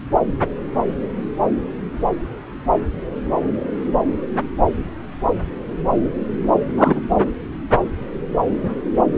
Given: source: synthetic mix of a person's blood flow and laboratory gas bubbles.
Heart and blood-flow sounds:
Doppler ultrasound of blood flow; subclavian vein
6.77-7.00 s: bubbles
From the record:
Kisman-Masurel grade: 113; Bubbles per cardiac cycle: 1 to 2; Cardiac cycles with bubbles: 1 to 10%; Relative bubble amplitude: loud (0.450 to 0.775); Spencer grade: 1 (occasional bubble signal discernible with the cardiac motion signal, with majority of cardiac periods free of bubbles); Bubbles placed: anywhere in the cardiac cycle

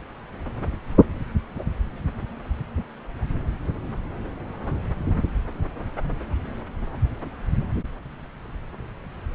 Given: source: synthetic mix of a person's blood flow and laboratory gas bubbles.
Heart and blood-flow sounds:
Doppler ultrasound of blood flow; subclavian vein
no bubbles
From the record:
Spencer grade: 0 (complete lack of bubble signals)

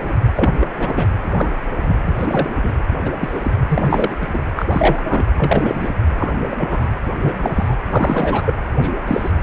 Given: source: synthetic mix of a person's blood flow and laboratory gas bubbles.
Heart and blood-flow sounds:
Doppler ultrasound of blood flow; precordium
0.01-0.12 s: bubbles
0.36-0.50 s: bubbles
0.60-0.67 s: bubbles
0.76-1.07 s: bubbles
1.22-1.67 s: bubbles
1.80-1.97 s: bubbles
2.06-2.13 s: bubbles
2.18-2.50 s: bubbles
2.62-2.73 s: bubbles
3.05-3.10 s: bubbles
3.20-3.41 s: bubbles
3.43-3.53 s: bubbles
3.69-4.16 s: bubbles
4.21-4.27 s: bubbles
4.33-4.42 s: bubbles
4.56-4.66 s: bubbles
4.71-5.02 s: bubbles
5.08-5.25 s: bubbles
5.38-5.89 s: bubbles
6.16-6.32 s: bubbles
6.50-6.91 s: bubbles
7.21-7.76 s: bubbles
7.81-8.54 s: bubbles
8.81-8.90 s: bubbles
9.07-9.31 s: bubbles
From the record:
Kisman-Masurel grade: 242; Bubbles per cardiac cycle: several, 3 to 8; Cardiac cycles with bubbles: 100%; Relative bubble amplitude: moderate (0.250 to 0.450); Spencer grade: 3 (all of the cardiac periods contain showers or single bubble signals, but not dominating or overriding the cardiac motion signals); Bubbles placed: anywhere in the cardiac cycle

